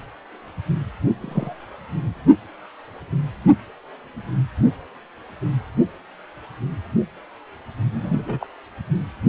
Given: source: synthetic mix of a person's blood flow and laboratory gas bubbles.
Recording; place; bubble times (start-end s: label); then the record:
Doppler ultrasound of blood flow; precordium
1.22-1.65 s: bubbles
7.92-8.46 s: bubbles
From the record:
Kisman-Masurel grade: 121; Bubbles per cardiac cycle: 1 to 2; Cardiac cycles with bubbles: 10 to 50%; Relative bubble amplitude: barely perceptible (0.100 to 0.250); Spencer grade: 2 (many but less than half of the cardiac periods contain bubble signals, singularly or in groups); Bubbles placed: only in the low amplitude regions of the cardiac cycle